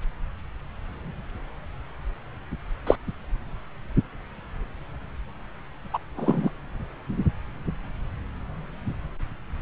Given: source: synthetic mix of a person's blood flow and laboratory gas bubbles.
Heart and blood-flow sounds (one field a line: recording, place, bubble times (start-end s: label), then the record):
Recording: Doppler ultrasound of blood flow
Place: subclavian vein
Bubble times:
2.87-2.96 s: bubbles
5.93-5.98 s: bubbles
6.17-6.50 s: bubbles
From the record:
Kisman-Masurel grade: 123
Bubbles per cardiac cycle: 1 to 2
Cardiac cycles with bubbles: 10 to 50%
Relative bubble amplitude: loud (0.450 to 0.775)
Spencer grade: 2 (many but less than half of the cardiac periods contain bubble signals, singularly or in groups)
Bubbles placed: anywhere in the cardiac cycle